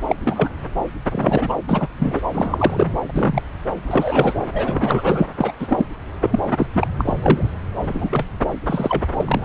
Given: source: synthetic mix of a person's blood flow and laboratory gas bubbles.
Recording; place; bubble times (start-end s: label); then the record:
Doppler ultrasound of blood flow; subclavian vein
0.07-0.15 s: bubbles
0.24-0.50 s: bubbles
1.12-1.53 s: bubbles
1.69-1.88 s: bubbles
1.98-2.21 s: bubbles
2.32-2.87 s: bubbles
3.08-3.42 s: bubbles
3.86-4.34 s: bubbles
4.53-5.27 s: bubbles
5.37-5.52 s: bubbles
5.59-5.86 s: bubbles
6.21-6.39 s: bubbles
6.56-6.66 s: bubbles
6.74-6.88 s: bubbles
6.98-7.03 s: bubbles
7.05-7.49 s: bubbles
7.88-8.26 s: bubbles
8.39-8.46 s: bubbles
8.66-9.05 s: bubbles
9.13-9.45 s: bubbles
From the record:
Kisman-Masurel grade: 243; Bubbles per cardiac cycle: several, 3 to 8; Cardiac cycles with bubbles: 100%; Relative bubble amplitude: loud (0.450 to 0.775); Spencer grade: 3 (all of the cardiac periods contain showers or single bubble signals, but not dominating or overriding the cardiac motion signals); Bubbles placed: anywhere in the cardiac cycle